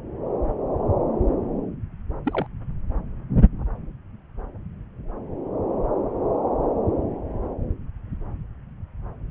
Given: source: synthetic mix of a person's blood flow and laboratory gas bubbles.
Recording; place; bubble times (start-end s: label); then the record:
Doppler ultrasound of blood flow; subclavian vein
2.25-2.46 s: bubbles
From the record:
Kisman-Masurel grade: 111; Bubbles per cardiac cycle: 1 to 2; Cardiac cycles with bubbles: 1 to 10%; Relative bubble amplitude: barely perceptible (0.100 to 0.250); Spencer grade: 1 (occasional bubble signal discernible with the cardiac motion signal, with majority of cardiac periods free of bubbles); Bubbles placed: anywhere in the cardiac cycle